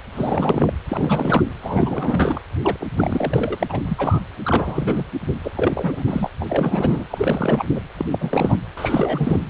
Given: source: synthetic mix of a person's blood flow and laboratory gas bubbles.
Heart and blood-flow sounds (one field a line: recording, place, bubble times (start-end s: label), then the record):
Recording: Doppler ultrasound of blood flow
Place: precordium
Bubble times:
0.12-0.73 s: bubbles
0.88-1.43 s: bubbles
1.62-2.42 s: bubbles
2.62-2.77 s: bubbles
2.80-2.87 s: bubbles
2.96-3.85 s: bubbles
3.88-4.21 s: bubbles
4.44-5.04 s: bubbles
5.44-5.51 s: bubbles
5.57-6.03 s: bubbles
6.07-6.29 s: bubbles
6.41-6.46 s: bubbles
6.49-7.05 s: bubbles
7.10-7.65 s: bubbles
7.75-7.81 s: bubbles
7.98-8.05 s: bubbles
8.11-8.58 s: bubbles
8.76-9.40 s: bubbles
From the record:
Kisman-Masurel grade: 343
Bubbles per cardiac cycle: rolling drumbeat, 9 or more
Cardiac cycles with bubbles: 100%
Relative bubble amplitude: loud (0.450 to 0.775)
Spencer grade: 3 (all of the cardiac periods contain showers or single bubble signals, but not dominating or overriding the cardiac motion signals)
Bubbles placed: anywhere in the cardiac cycle